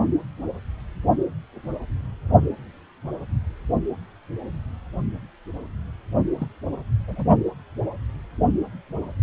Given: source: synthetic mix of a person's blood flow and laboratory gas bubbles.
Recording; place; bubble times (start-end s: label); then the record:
Doppler ultrasound of blood flow; precordium
6.38-6.48 s: bubbles
7.08-7.25 s: bubbles
From the record:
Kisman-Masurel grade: 111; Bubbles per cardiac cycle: 1 to 2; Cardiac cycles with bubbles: 1 to 10%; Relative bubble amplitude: barely perceptible (0.100 to 0.250); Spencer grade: 1 (occasional bubble signal discernible with the cardiac motion signal, with majority of cardiac periods free of bubbles); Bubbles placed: only in the low amplitude regions of the cardiac cycle